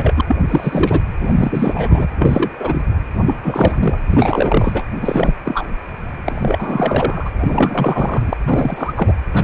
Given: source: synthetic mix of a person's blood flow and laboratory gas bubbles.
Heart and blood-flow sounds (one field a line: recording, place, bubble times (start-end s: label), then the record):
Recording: Doppler ultrasound of blood flow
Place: precordium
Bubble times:
0.00-0.14 s: bubbles
0.16-0.21 s: bubbles
0.28-0.36 s: bubbles
0.48-1.01 s: bubbles
1.21-2.07 s: bubbles
2.19-2.81 s: bubbles
3.25-4.00 s: bubbles
4.07-4.83 s: bubbles
5.00-5.34 s: bubbles
5.44-5.73 s: bubbles
6.25-7.31 s: bubbles
7.38-8.34 s: bubbles
8.46-9.13 s: bubbles
9.33-9.44 s: bubbles
From the record:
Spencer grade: 3 (all of the cardiac periods contain showers or single bubble signals, but not dominating or overriding the cardiac motion signals)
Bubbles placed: anywhere in the cardiac cycle